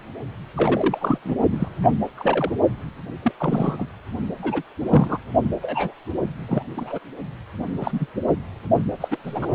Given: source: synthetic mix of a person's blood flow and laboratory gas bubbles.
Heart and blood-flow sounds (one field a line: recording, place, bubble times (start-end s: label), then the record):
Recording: Doppler ultrasound of blood flow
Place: precordium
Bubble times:
0.56-1.19 s: bubbles
1.24-1.35 s: bubbles
1.52-1.68 s: bubbles
1.79-1.92 s: bubbles
2.17-2.52 s: bubbles
3.23-3.31 s: bubbles
3.40-3.88 s: bubbles
4.42-4.62 s: bubbles
4.90-5.18 s: bubbles
5.62-5.93 s: bubbles
6.48-6.62 s: bubbles
6.76-6.99 s: bubbles
7.80-8.06 s: bubbles
9.00-9.18 s: bubbles
9.23-9.55 s: bubbles
From the record:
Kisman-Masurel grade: 242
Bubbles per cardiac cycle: several, 3 to 8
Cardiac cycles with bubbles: 100%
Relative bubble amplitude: moderate (0.250 to 0.450)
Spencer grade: 3 (all of the cardiac periods contain showers or single bubble signals, but not dominating or overriding the cardiac motion signals)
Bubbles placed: only in the low amplitude regions of the cardiac cycle